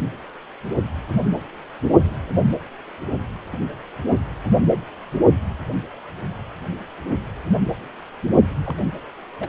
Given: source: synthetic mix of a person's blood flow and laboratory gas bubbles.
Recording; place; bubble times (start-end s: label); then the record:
Doppler ultrasound of blood flow; precordium
8.66-8.76 s: bubbles
8.79-8.84 s: bubbles
9.40-9.48 s: bubbles
From the record:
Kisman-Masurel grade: 112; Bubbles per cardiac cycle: 1 to 2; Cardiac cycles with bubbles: 1 to 10%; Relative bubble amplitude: moderate (0.250 to 0.450); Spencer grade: 1 (occasional bubble signal discernible with the cardiac motion signal, with majority of cardiac periods free of bubbles); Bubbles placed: anywhere in the cardiac cycle